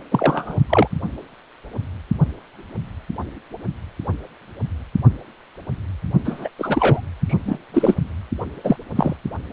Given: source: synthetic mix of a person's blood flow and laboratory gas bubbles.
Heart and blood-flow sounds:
Doppler ultrasound of blood flow; precordium
0.11-0.59 s: bubbles
0.69-0.88 s: bubbles
6.25-6.49 s: bubbles
6.58-7.01 s: bubbles
7.27-7.58 s: bubbles
7.74-7.96 s: bubbles
8.63-8.76 s: bubbles
8.95-9.16 s: bubbles
From the record:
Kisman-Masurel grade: 223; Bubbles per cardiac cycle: several, 3 to 8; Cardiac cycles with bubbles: 10 to 50%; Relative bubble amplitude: loud (0.450 to 0.775); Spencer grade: 2 (many but less than half of the cardiac periods contain bubble signals, singularly or in groups); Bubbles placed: only in the low amplitude regions of the cardiac cycle

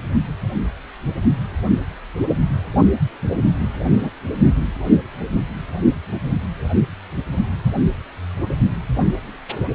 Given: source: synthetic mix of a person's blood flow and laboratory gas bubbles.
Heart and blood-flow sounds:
Doppler ultrasound of blood flow; precordium
4.02-4.10 s: bubbles
From the record:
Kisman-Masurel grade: 112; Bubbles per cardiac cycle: 1 to 2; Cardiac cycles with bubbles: 1 to 10%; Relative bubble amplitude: moderate (0.250 to 0.450); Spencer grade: 1 (occasional bubble signal discernible with the cardiac motion signal, with majority of cardiac periods free of bubbles); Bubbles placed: only in the low amplitude regions of the cardiac cycle

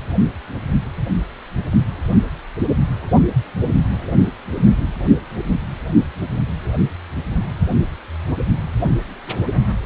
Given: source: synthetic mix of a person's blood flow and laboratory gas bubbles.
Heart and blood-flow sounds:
Doppler ultrasound of blood flow; precordium
9.24-9.33 s: bubbles
9.50-9.61 s: bubbles
From the record:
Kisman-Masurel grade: 111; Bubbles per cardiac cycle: 1 to 2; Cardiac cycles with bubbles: 1 to 10%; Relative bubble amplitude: barely perceptible (0.100 to 0.250); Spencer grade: 1 (occasional bubble signal discernible with the cardiac motion signal, with majority of cardiac periods free of bubbles); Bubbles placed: only in the low amplitude regions of the cardiac cycle

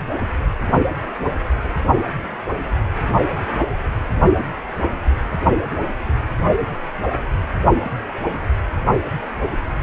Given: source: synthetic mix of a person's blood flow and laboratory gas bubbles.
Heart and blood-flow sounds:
Doppler ultrasound of blood flow; precordium
5.32-5.37 s: bubbles
5.45-5.62 s: bubbles
From the record:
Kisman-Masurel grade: 111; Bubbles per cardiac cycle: 1 to 2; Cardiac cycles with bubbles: 1 to 10%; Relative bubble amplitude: barely perceptible (0.100 to 0.250); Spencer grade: 1 (occasional bubble signal discernible with the cardiac motion signal, with majority of cardiac periods free of bubbles); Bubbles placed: anywhere in the cardiac cycle

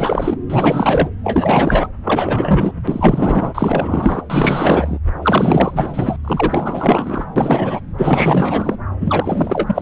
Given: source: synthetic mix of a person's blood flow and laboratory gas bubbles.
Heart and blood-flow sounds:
Doppler ultrasound of blood flow; subclavian vein
0.00-0.37 s: bubbles
0.49-1.09 s: bubbles
1.23-1.88 s: bubbles
2.04-2.72 s: bubbles
2.87-4.23 s: bubbles
4.30-4.99 s: bubbles
5.22-6.17 s: bubbles
6.24-7.25 s: bubbles
7.36-7.81 s: bubbles
7.98-8.76 s: bubbles
9.00-9.81 s: bubbles
From the record:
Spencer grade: 4 (maximum detectable bubble signal sounding continuously throughout systole and diastole of every cardiac period, and overriding the amplitude of the normal cardiac signals); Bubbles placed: anywhere in the cardiac cycle

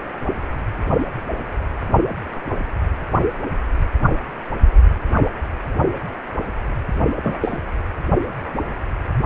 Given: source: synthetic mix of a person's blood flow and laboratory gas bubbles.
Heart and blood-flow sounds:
Doppler ultrasound of blood flow; precordium
7.22-7.38 s: bubbles
7.41-7.60 s: bubbles
From the record:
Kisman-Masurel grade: 112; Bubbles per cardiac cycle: 1 to 2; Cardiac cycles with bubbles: 1 to 10%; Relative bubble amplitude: moderate (0.250 to 0.450); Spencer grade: 1 (occasional bubble signal discernible with the cardiac motion signal, with majority of cardiac periods free of bubbles); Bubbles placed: only in the low amplitude regions of the cardiac cycle

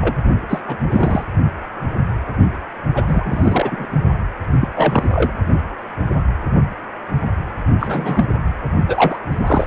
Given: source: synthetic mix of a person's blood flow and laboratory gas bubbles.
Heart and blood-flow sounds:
Doppler ultrasound of blood flow; precordium
0.00-0.16 s: bubbles
0.49-0.62 s: bubbles
0.67-0.77 s: bubbles
0.90-1.25 s: bubbles
2.94-3.86 s: bubbles
4.59-4.68 s: bubbles
4.76-5.32 s: bubbles
7.79-8.26 s: bubbles
8.87-9.19 s: bubbles
9.31-9.67 s: bubbles
From the record:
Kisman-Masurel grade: 232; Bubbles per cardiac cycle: several, 3 to 8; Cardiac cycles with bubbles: 50 to 99%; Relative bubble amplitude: moderate (0.250 to 0.450); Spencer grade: 3 (all of the cardiac periods contain showers or single bubble signals, but not dominating or overriding the cardiac motion signals); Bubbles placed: only in the low amplitude regions of the cardiac cycle

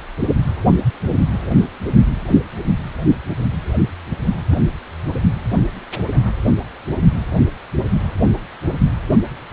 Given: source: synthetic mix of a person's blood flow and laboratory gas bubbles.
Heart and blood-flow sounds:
Doppler ultrasound of blood flow; precordium
4.51-4.62 s: bubbles
From the record:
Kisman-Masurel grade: 112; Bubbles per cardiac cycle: 1 to 2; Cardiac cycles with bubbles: 1 to 10%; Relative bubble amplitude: moderate (0.250 to 0.450); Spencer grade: 1 (occasional bubble signal discernible with the cardiac motion signal, with majority of cardiac periods free of bubbles); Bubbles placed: only in the low amplitude regions of the cardiac cycle

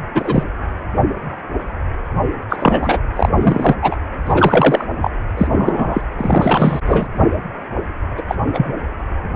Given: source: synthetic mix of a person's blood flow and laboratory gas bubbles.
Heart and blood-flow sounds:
Doppler ultrasound of blood flow; precordium
0.15-0.43 s: bubbles
2.50-2.56 s: bubbles
2.59-3.00 s: bubbles
3.15-3.29 s: bubbles
3.38-3.75 s: bubbles
3.82-3.96 s: bubbles
4.25-4.85 s: bubbles
5.01-5.11 s: bubbles
5.37-5.47 s: bubbles
5.51-6.01 s: bubbles
6.18-6.79 s: bubbles
6.85-7.08 s: bubbles
8.17-8.22 s: bubbles
8.28-8.36 s: bubbles
8.54-8.73 s: bubbles
From the record:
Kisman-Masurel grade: 233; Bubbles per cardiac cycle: several, 3 to 8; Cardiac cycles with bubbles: 50 to 99%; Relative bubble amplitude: loud (0.450 to 0.775); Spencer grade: 3 (all of the cardiac periods contain showers or single bubble signals, but not dominating or overriding the cardiac motion signals); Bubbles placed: anywhere in the cardiac cycle

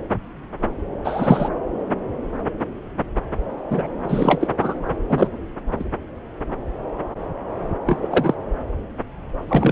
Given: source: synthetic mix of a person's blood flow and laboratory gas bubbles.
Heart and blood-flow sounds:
Doppler ultrasound of blood flow; subclavian vein
1.04-1.49 s: bubbles
3.71-3.87 s: bubbles
4.04-4.49 s: bubbles
4.58-4.79 s: bubbles
5.08-5.28 s: bubbles
5.79-5.84 s: bubbles
7.86-7.98 s: bubbles
8.01-8.34 s: bubbles
9.48-9.72 s: bubbles
From the record:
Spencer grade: 2 (many but less than half of the cardiac periods contain bubble signals, singularly or in groups); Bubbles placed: anywhere in the cardiac cycle

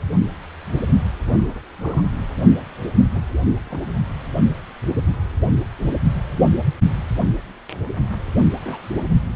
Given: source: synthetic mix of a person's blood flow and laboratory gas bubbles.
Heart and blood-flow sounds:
Doppler ultrasound of blood flow; precordium
1.27-1.60 s: bubbles
1.81-2.02 s: bubbles
3.14-3.21 s: bubbles
3.66-3.80 s: bubbles
8.61-9.06 s: bubbles
From the record:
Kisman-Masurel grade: 121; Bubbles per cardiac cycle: 1 to 2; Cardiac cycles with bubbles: 10 to 50%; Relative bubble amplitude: barely perceptible (0.100 to 0.250); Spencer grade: 2 (many but less than half of the cardiac periods contain bubble signals, singularly or in groups); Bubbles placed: only in the low amplitude regions of the cardiac cycle

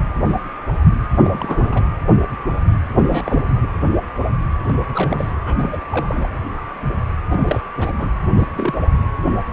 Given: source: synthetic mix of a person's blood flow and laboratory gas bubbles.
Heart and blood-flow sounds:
Doppler ultrasound of blood flow; precordium
1.11-1.83 s: bubbles
2.96-3.23 s: bubbles
3.25-3.44 s: bubbles
3.62-3.68 s: bubbles
4.68-4.76 s: bubbles
4.94-5.33 s: bubbles
5.45-5.80 s: bubbles
5.90-6.29 s: bubbles
7.29-7.60 s: bubbles
7.77-7.91 s: bubbles
7.98-8.10 s: bubbles
8.37-8.48 s: bubbles
8.55-8.74 s: bubbles
From the record:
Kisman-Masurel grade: 222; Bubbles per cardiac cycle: several, 3 to 8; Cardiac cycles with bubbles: 10 to 50%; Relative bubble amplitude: moderate (0.250 to 0.450); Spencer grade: 2 (many but less than half of the cardiac periods contain bubble signals, singularly or in groups); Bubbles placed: anywhere in the cardiac cycle

